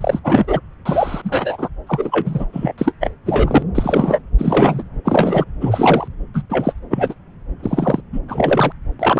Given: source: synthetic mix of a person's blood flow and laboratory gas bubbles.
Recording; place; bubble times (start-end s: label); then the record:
Doppler ultrasound of blood flow; subclavian vein
0.01-0.20 s: bubbles
0.24-0.60 s: bubbles
0.85-1.69 s: bubbles
1.87-2.47 s: bubbles
2.52-2.73 s: bubbles
2.77-2.93 s: bubbles
3.00-3.11 s: bubbles
3.25-3.63 s: bubbles
3.74-4.22 s: bubbles
4.38-4.83 s: bubbles
5.04-5.44 s: bubbles
5.61-6.08 s: bubbles
6.34-6.42 s: bubbles
6.49-6.72 s: bubbles
6.90-7.14 s: bubbles
7.62-8.02 s: bubbles
8.12-8.20 s: bubbles
8.28-8.72 s: bubbles
8.99-9.19 s: bubbles
From the record:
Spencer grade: 3 (all of the cardiac periods contain showers or single bubble signals, but not dominating or overriding the cardiac motion signals); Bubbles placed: anywhere in the cardiac cycle